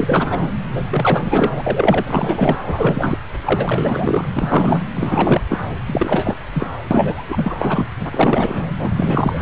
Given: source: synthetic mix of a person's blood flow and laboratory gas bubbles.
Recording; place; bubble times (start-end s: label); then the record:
Doppler ultrasound of blood flow; subclavian vein
0.00-0.49 s: bubbles
0.70-1.53 s: bubbles
1.56-2.57 s: bubbles
2.66-3.17 s: bubbles
3.44-4.28 s: bubbles
4.33-4.83 s: bubbles
4.95-5.42 s: bubbles
5.48-5.58 s: bubbles
5.87-6.38 s: bubbles
6.53-6.67 s: bubbles
6.91-7.25 s: bubbles
7.29-7.86 s: bubbles
7.99-8.71 s: bubbles
8.79-9.42 s: bubbles
From the record:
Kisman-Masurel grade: 343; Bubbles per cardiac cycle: rolling drumbeat, 9 or more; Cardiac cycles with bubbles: 100%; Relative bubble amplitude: loud (0.450 to 0.775); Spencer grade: 3 (all of the cardiac periods contain showers or single bubble signals, but not dominating or overriding the cardiac motion signals); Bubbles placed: anywhere in the cardiac cycle